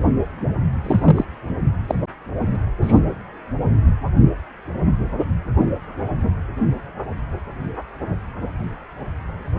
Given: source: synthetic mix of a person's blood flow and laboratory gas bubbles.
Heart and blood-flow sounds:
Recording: Doppler ultrasound of blood flow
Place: precordium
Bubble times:
0.84-1.25 s: bubbles
1.87-1.95 s: bubbles
2.81-3.00 s: bubbles
From the record:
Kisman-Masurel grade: 123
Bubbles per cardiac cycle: 1 to 2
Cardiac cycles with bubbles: 10 to 50%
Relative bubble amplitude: loud (0.450 to 0.775)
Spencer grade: 2 (many but less than half of the cardiac periods contain bubble signals, singularly or in groups)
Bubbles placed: anywhere in the cardiac cycle

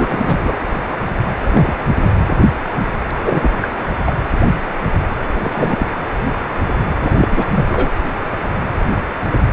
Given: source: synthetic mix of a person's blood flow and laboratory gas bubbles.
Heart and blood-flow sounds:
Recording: Doppler ultrasound of blood flow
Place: precordium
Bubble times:
0.00-0.55 s: bubbles
1.45-1.74 s: bubbles
2.02-2.10 s: bubbles
3.23-3.50 s: bubbles
3.62-3.69 s: bubbles
4.05-4.15 s: bubbles
5.43-5.86 s: bubbles
7.00-7.48 s: bubbles
7.54-7.90 s: bubbles
From the record:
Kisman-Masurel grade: 223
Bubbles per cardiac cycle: several, 3 to 8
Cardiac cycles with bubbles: 10 to 50%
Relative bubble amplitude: loud (0.450 to 0.775)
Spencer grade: 2 (many but less than half of the cardiac periods contain bubble signals, singularly or in groups)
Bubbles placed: anywhere in the cardiac cycle

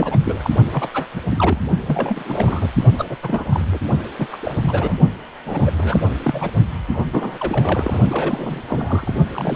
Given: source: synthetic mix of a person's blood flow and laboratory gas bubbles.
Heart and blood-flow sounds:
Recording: Doppler ultrasound of blood flow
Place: precordium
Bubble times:
0.00-0.21 s: bubbles
0.24-0.50 s: bubbles
0.72-0.88 s: bubbles
0.93-1.06 s: bubbles
1.13-1.21 s: bubbles
1.31-1.61 s: bubbles
1.87-2.68 s: bubbles
2.98-3.05 s: bubbles
3.10-3.17 s: bubbles
3.23-3.45 s: bubbles
3.49-3.65 s: bubbles
3.72-3.79 s: bubbles
4.18-4.27 s: bubbles
4.32-4.37 s: bubbles
4.39-4.96 s: bubbles
5.46-5.72 s: bubbles
5.77-6.51 s: bubbles
6.90-7.05 s: bubbles
7.12-7.38 s: bubbles
7.40-8.00 s: bubbles
8.08-8.62 s: bubbles
8.68-9.14 s: bubbles
9.34-9.56 s: bubbles
From the record:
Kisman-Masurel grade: 342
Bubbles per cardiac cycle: rolling drumbeat, 9 or more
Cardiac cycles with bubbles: 100%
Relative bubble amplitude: moderate (0.250 to 0.450)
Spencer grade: 3 (all of the cardiac periods contain showers or single bubble signals, but not dominating or overriding the cardiac motion signals)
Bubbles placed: only in the low amplitude regions of the cardiac cycle

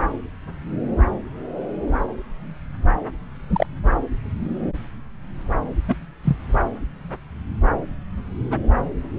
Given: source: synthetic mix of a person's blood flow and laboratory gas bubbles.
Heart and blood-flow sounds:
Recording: Doppler ultrasound of blood flow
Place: subclavian vein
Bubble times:
3.52-3.67 s: bubbles
5.88-5.95 s: bubbles
6.24-6.37 s: bubbles
From the record:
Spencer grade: 2 (many but less than half of the cardiac periods contain bubble signals, singularly or in groups)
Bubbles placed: anywhere in the cardiac cycle

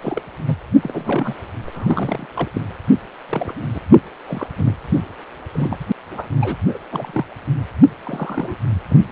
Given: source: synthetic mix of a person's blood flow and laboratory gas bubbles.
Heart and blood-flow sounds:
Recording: Doppler ultrasound of blood flow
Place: precordium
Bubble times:
0.02-0.21 s: bubbles
0.46-0.58 s: bubbles
0.83-1.34 s: bubbles
1.66-1.71 s: bubbles
1.75-2.27 s: bubbles
2.35-2.48 s: bubbles
2.53-2.62 s: bubbles
3.29-3.54 s: bubbles
3.74-3.82 s: bubbles
4.28-4.47 s: bubbles
4.57-4.75 s: bubbles
4.89-5.01 s: bubbles
5.53-5.78 s: bubbles
6.11-6.28 s: bubbles
6.41-6.58 s: bubbles
6.67-6.78 s: bubbles
6.92-7.25 s: bubbles
8.04-8.56 s: bubbles
8.89-8.96 s: bubbles
From the record:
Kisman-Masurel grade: 242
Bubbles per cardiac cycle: several, 3 to 8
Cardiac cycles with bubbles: 100%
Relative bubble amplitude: moderate (0.250 to 0.450)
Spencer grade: 3 (all of the cardiac periods contain showers or single bubble signals, but not dominating or overriding the cardiac motion signals)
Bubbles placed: anywhere in the cardiac cycle

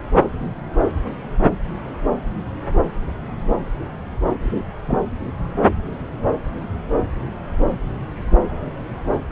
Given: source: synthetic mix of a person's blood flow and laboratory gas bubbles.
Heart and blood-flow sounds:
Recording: Doppler ultrasound of blood flow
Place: subclavian vein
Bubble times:
4.42-4.63 s: bubbles
4.86-4.99 s: bubbles
From the record:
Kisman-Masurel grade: 112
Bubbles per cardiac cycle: 1 to 2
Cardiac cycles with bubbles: 1 to 10%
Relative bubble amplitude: moderate (0.250 to 0.450)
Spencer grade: 1 (occasional bubble signal discernible with the cardiac motion signal, with majority of cardiac periods free of bubbles)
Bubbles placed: anywhere in the cardiac cycle

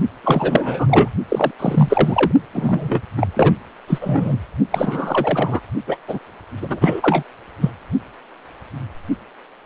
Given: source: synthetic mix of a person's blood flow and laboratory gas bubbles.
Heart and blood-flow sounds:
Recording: Doppler ultrasound of blood flow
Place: precordium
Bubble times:
0.23-1.11 s: bubbles
1.29-1.51 s: bubbles
1.59-2.31 s: bubbles
2.52-3.02 s: bubbles
3.17-3.27 s: bubbles
3.34-3.54 s: bubbles
3.87-4.36 s: bubbles
4.70-5.60 s: bubbles
5.86-5.97 s: bubbles
6.07-6.19 s: bubbles
6.60-7.23 s: bubbles
7.60-7.70 s: bubbles
From the record:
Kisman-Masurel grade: 333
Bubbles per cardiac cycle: rolling drumbeat, 9 or more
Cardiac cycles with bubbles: 50 to 99%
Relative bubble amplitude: loud (0.450 to 0.775)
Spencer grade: 3 (all of the cardiac periods contain showers or single bubble signals, but not dominating or overriding the cardiac motion signals)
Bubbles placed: only in the low amplitude regions of the cardiac cycle

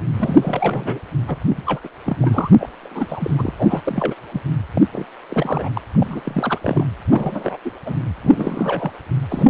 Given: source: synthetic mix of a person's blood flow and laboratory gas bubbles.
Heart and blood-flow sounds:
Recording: Doppler ultrasound of blood flow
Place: precordium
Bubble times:
0.14-1.00 s: bubbles
1.27-1.37 s: bubbles
1.49-1.63 s: bubbles
1.66-1.80 s: bubbles
1.83-1.89 s: bubbles
2.06-2.17 s: bubbles
2.21-2.50 s: bubbles
2.58-2.69 s: bubbles
2.81-3.53 s: bubbles
3.58-3.81 s: bubbles
3.83-4.14 s: bubbles
4.31-4.41 s: bubbles
4.73-4.83 s: bubbles
4.92-5.06 s: bubbles
5.29-5.69 s: bubbles
5.75-5.81 s: bubbles
5.94-6.22 s: bubbles
6.25-6.58 s: bubbles
6.61-6.85 s: bubbles
7.09-7.57 s: bubbles
7.64-7.71 s: bubbles
7.86-7.96 s: bubbles
8.23-8.91 s: bubbles
9.31-9.50 s: bubbles
From the record:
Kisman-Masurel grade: 342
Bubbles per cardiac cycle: rolling drumbeat, 9 or more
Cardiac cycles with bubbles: 100%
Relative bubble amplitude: moderate (0.250 to 0.450)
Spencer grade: 3 (all of the cardiac periods contain showers or single bubble signals, but not dominating or overriding the cardiac motion signals)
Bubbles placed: anywhere in the cardiac cycle

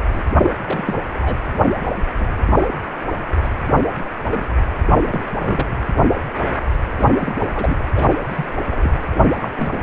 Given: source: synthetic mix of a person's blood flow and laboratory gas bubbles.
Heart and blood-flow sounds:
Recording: Doppler ultrasound of blood flow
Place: precordium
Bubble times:
0.12-0.23 s: bubbles
0.41-0.50 s: bubbles
0.66-0.99 s: bubbles
1.21-1.38 s: bubbles
2.20-2.27 s: bubbles
2.55-2.67 s: bubbles
3.36-3.49 s: bubbles
4.31-4.47 s: bubbles
4.91-5.37 s: bubbles
5.40-5.67 s: bubbles
6.97-7.14 s: bubbles
7.20-7.35 s: bubbles
7.55-7.78 s: bubbles
7.95-8.14 s: bubbles
8.27-8.46 s: bubbles
8.70-8.93 s: bubbles
9.14-9.27 s: bubbles
9.42-9.49 s: bubbles
9.58-9.80 s: bubbles
From the record:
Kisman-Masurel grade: 232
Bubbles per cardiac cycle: several, 3 to 8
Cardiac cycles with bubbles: 50 to 99%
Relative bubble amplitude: moderate (0.250 to 0.450)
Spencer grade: 3 (all of the cardiac periods contain showers or single bubble signals, but not dominating or overriding the cardiac motion signals)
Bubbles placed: anywhere in the cardiac cycle

